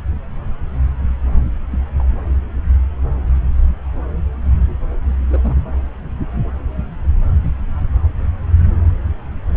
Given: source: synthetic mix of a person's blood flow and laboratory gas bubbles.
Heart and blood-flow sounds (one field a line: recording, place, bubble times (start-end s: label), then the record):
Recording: Doppler ultrasound of blood flow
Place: subclavian vein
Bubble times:
1.71-1.79 s: bubbles
1.99-2.04 s: bubbles
5.30-5.55 s: bubbles
From the record:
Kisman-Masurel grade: 111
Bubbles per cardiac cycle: 1 to 2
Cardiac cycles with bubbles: 1 to 10%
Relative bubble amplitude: barely perceptible (0.100 to 0.250)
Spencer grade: 1 (occasional bubble signal discernible with the cardiac motion signal, with majority of cardiac periods free of bubbles)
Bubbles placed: anywhere in the cardiac cycle